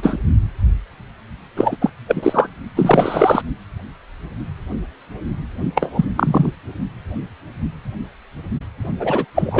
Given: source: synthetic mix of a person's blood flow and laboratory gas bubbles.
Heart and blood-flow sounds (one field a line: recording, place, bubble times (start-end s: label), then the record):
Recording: Doppler ultrasound of blood flow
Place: precordium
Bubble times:
0.00-0.18 s: bubbles
1.56-1.76 s: bubbles
1.81-1.90 s: bubbles
2.07-2.48 s: bubbles
2.76-3.42 s: bubbles
5.75-6.05 s: bubbles
6.16-6.51 s: bubbles
8.99-9.26 s: bubbles
9.35-9.60 s: bubbles
From the record:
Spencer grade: 2 (many but less than half of the cardiac periods contain bubble signals, singularly or in groups)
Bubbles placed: only in the low amplitude regions of the cardiac cycle